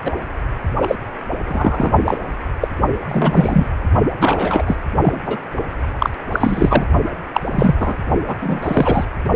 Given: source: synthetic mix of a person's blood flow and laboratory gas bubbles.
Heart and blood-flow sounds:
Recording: Doppler ultrasound of blood flow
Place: precordium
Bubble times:
0.05-0.13 s: bubbles
0.82-0.96 s: bubbles
1.46-1.92 s: bubbles
2.05-2.17 s: bubbles
2.61-2.68 s: bubbles
3.08-3.66 s: bubbles
4.20-4.63 s: bubbles
4.65-4.77 s: bubbles
5.02-5.37 s: bubbles
5.99-6.10 s: bubbles
6.31-6.84 s: bubbles
7.33-7.40 s: bubbles
7.51-7.75 s: bubbles
7.79-7.97 s: bubbles
8.27-8.36 s: bubbles
8.40-9.05 s: bubbles
From the record:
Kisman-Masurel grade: 243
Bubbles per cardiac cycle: several, 3 to 8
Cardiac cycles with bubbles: 100%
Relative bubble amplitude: loud (0.450 to 0.775)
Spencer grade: 3 (all of the cardiac periods contain showers or single bubble signals, but not dominating or overriding the cardiac motion signals)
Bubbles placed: only in the low amplitude regions of the cardiac cycle

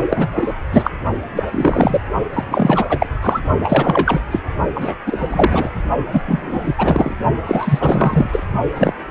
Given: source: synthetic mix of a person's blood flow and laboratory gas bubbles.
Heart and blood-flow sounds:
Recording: Doppler ultrasound of blood flow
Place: precordium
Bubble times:
0.09-0.27 s: bubbles
0.34-0.54 s: bubbles
0.72-0.92 s: bubbles
1.35-1.43 s: bubbles
1.47-2.00 s: bubbles
2.33-2.44 s: bubbles
2.49-2.86 s: bubbles
2.89-3.06 s: bubbles
3.21-3.41 s: bubbles
3.63-4.22 s: bubbles
4.31-4.39 s: bubbles
4.74-4.96 s: bubbles
5.06-5.71 s: bubbles
6.12-6.21 s: bubbles
6.26-6.74 s: bubbles
6.78-7.14 s: bubbles
7.46-8.43 s: bubbles
8.75-8.95 s: bubbles
From the record:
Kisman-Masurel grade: 343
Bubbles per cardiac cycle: rolling drumbeat, 9 or more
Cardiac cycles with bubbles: 100%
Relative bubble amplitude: loud (0.450 to 0.775)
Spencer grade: 3 (all of the cardiac periods contain showers or single bubble signals, but not dominating or overriding the cardiac motion signals)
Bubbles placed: only in the low amplitude regions of the cardiac cycle

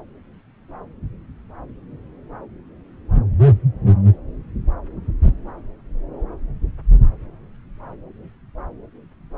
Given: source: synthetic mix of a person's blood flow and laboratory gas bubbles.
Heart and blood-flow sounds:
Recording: Doppler ultrasound of blood flow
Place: subclavian vein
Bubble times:
no bubbles
From the record:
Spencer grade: 0 (complete lack of bubble signals)

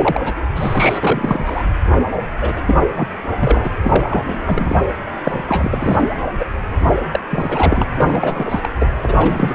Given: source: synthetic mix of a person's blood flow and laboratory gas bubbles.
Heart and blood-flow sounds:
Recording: Doppler ultrasound of blood flow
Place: precordium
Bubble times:
0.00-0.33 s: bubbles
0.55-1.00 s: bubbles
1.03-1.63 s: bubbles
2.40-2.62 s: bubbles
2.67-2.82 s: bubbles
2.88-3.08 s: bubbles
3.39-3.70 s: bubbles
3.84-4.24 s: bubbles
4.28-4.86 s: bubbles
5.24-6.02 s: bubbles
6.39-6.45 s: bubbles
7.11-7.20 s: bubbles
7.31-7.84 s: bubbles
7.95-8.69 s: bubbles
8.79-8.88 s: bubbles
9.04-9.55 s: bubbles
From the record:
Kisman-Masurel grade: 342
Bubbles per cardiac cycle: rolling drumbeat, 9 or more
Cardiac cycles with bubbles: 100%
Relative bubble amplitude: moderate (0.250 to 0.450)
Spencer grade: 3 (all of the cardiac periods contain showers or single bubble signals, but not dominating or overriding the cardiac motion signals)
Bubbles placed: anywhere in the cardiac cycle

